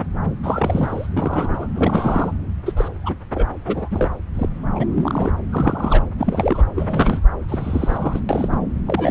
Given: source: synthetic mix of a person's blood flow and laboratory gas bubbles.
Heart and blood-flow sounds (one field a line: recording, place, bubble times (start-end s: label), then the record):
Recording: Doppler ultrasound of blood flow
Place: subclavian vein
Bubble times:
0.43-1.07 s: bubbles
1.17-1.68 s: bubbles
1.75-2.32 s: bubbles
2.66-2.73 s: bubbles
2.77-2.89 s: bubbles
3.04-3.15 s: bubbles
3.34-3.47 s: bubbles
3.66-3.89 s: bubbles
3.91-4.09 s: bubbles
4.33-4.49 s: bubbles
4.75-4.86 s: bubbles
4.96-5.30 s: bubbles
5.52-6.04 s: bubbles
6.19-6.64 s: bubbles
6.75-7.20 s: bubbles
7.48-8.21 s: bubbles
8.29-8.58 s: bubbles
8.86-9.11 s: bubbles
From the record:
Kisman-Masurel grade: 242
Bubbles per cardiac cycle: several, 3 to 8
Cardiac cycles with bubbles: 100%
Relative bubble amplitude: moderate (0.250 to 0.450)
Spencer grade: 3 (all of the cardiac periods contain showers or single bubble signals, but not dominating or overriding the cardiac motion signals)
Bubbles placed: anywhere in the cardiac cycle